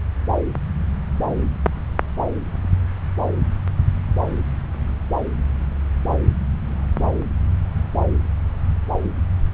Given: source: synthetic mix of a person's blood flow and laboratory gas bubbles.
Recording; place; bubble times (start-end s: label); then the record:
Doppler ultrasound of blood flow; subclavian vein
no bubbles
From the record:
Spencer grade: 0 (complete lack of bubble signals)